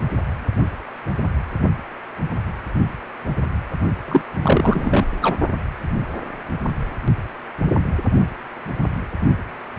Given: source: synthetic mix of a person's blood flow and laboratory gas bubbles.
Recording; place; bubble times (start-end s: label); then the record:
Doppler ultrasound of blood flow; precordium
4.08-4.21 s: bubbles
4.42-5.05 s: bubbles
5.21-5.36 s: bubbles
From the record:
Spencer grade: 1 (occasional bubble signal discernible with the cardiac motion signal, with majority of cardiac periods free of bubbles); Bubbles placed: only in the low amplitude regions of the cardiac cycle